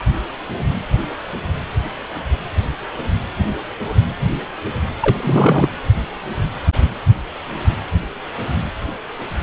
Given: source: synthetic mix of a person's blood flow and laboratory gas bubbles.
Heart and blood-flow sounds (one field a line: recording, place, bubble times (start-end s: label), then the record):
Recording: Doppler ultrasound of blood flow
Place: precordium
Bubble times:
5.01-5.69 s: bubbles
From the record:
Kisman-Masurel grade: 212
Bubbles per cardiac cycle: several, 3 to 8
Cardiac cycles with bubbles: 1 to 10%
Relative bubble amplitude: moderate (0.250 to 0.450)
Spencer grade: 1 (occasional bubble signal discernible with the cardiac motion signal, with majority of cardiac periods free of bubbles)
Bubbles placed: anywhere in the cardiac cycle